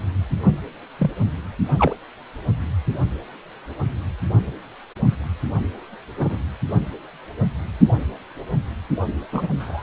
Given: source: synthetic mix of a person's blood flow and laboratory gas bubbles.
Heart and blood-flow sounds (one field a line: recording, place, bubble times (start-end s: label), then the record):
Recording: Doppler ultrasound of blood flow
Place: precordium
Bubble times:
0.98-1.10 s: bubbles
1.78-1.95 s: bubbles
6.17-6.38 s: bubbles
9.33-9.47 s: bubbles
9.60-9.83 s: bubbles
From the record:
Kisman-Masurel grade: 122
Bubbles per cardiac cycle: 1 to 2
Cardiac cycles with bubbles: 10 to 50%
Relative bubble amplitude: moderate (0.250 to 0.450)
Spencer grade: 2 (many but less than half of the cardiac periods contain bubble signals, singularly or in groups)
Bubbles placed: only in the low amplitude regions of the cardiac cycle